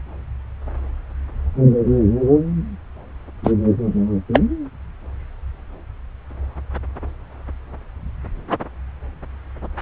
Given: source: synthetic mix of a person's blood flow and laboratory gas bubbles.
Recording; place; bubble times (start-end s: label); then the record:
Doppler ultrasound of blood flow; subclavian vein
3.44-3.52 s: bubbles
4.33-4.41 s: bubbles
From the record:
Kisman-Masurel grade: 123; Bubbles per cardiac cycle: 1 to 2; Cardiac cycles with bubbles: 10 to 50%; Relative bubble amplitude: loud (0.450 to 0.775); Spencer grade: 2 (many but less than half of the cardiac periods contain bubble signals, singularly or in groups); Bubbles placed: anywhere in the cardiac cycle